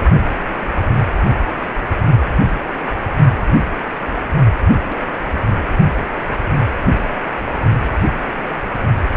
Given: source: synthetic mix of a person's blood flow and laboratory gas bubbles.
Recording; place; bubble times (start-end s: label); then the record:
Doppler ultrasound of blood flow; precordium
2.06-2.11 s: bubbles
4.74-4.97 s: bubbles
6.82-6.86 s: bubbles
From the record:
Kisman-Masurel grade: 121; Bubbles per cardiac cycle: 1 to 2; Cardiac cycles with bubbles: 10 to 50%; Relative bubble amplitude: barely perceptible (0.100 to 0.250); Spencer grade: 2 (many but less than half of the cardiac periods contain bubble signals, singularly or in groups); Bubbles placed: only in the low amplitude regions of the cardiac cycle